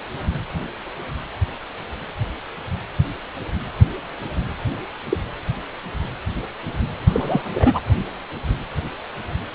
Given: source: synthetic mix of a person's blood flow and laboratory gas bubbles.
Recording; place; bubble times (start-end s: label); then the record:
Doppler ultrasound of blood flow; precordium
5.10-5.17 s: bubbles
7.07-7.42 s: bubbles
7.54-7.79 s: bubbles
From the record:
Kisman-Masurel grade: 122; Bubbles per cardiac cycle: 1 to 2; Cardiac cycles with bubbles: 10 to 50%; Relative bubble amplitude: moderate (0.250 to 0.450); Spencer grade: 2 (many but less than half of the cardiac periods contain bubble signals, singularly or in groups); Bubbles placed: anywhere in the cardiac cycle